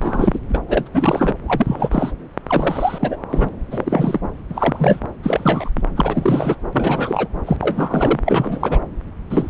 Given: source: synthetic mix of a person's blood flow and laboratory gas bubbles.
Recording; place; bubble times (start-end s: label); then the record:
Doppler ultrasound of blood flow; subclavian vein
0.02-0.40 s: bubbles
0.49-0.62 s: bubbles
0.68-0.88 s: bubbles
0.94-1.34 s: bubbles
1.46-2.12 s: bubbles
2.49-3.17 s: bubbles
3.29-3.49 s: bubbles
3.71-4.21 s: bubbles
4.50-5.00 s: bubbles
5.23-5.70 s: bubbles
5.76-5.81 s: bubbles
5.96-6.55 s: bubbles
6.73-7.27 s: bubbles
7.46-8.20 s: bubbles
8.25-8.79 s: bubbles
9.29-9.50 s: bubbles
From the record:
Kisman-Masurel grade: 342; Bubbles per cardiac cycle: rolling drumbeat, 9 or more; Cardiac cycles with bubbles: 100%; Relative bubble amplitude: moderate (0.250 to 0.450); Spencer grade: 3 (all of the cardiac periods contain showers or single bubble signals, but not dominating or overriding the cardiac motion signals); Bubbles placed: anywhere in the cardiac cycle